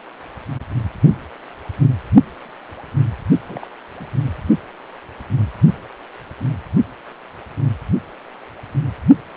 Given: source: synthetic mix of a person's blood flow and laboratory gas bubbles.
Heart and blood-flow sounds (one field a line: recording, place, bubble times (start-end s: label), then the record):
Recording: Doppler ultrasound of blood flow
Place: precordium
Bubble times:
3.47-3.67 s: bubbles
3.99-4.05 s: bubbles
From the record:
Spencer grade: 1 (occasional bubble signal discernible with the cardiac motion signal, with majority of cardiac periods free of bubbles)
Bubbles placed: only in the low amplitude regions of the cardiac cycle